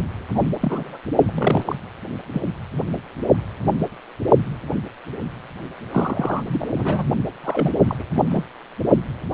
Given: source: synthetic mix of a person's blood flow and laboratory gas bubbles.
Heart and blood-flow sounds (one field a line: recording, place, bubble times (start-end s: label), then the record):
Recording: Doppler ultrasound of blood flow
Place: precordium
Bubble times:
0.35-0.40 s: bubbles
0.61-0.98 s: bubbles
1.20-1.31 s: bubbles
1.35-1.75 s: bubbles
2.33-2.42 s: bubbles
5.92-6.44 s: bubbles
6.46-6.67 s: bubbles
6.73-7.06 s: bubbles
7.43-7.70 s: bubbles
7.87-8.04 s: bubbles
8.16-8.23 s: bubbles
8.29-8.44 s: bubbles
From the record:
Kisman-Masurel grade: 232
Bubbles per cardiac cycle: several, 3 to 8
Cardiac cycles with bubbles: 50 to 99%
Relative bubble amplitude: moderate (0.250 to 0.450)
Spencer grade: 3 (all of the cardiac periods contain showers or single bubble signals, but not dominating or overriding the cardiac motion signals)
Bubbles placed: only in the low amplitude regions of the cardiac cycle